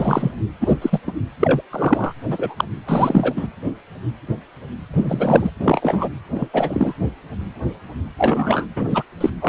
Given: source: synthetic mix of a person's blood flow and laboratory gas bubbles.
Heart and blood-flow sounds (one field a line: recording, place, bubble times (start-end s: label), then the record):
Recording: Doppler ultrasound of blood flow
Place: precordium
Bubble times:
0.00-0.32 s: bubbles
0.60-0.77 s: bubbles
0.81-1.02 s: bubbles
1.06-1.12 s: bubbles
1.39-1.61 s: bubbles
1.72-2.13 s: bubbles
2.28-2.65 s: bubbles
2.86-3.33 s: bubbles
3.36-3.48 s: bubbles
4.93-5.50 s: bubbles
5.59-6.09 s: bubbles
6.33-6.48 s: bubbles
6.53-6.93 s: bubbles
8.18-8.66 s: bubbles
8.76-9.03 s: bubbles
9.21-9.30 s: bubbles
9.41-9.49 s: bubbles
From the record:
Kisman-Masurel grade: 233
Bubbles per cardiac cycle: several, 3 to 8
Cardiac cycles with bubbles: 50 to 99%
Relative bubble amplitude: loud (0.450 to 0.775)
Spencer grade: 3 (all of the cardiac periods contain showers or single bubble signals, but not dominating or overriding the cardiac motion signals)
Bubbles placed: anywhere in the cardiac cycle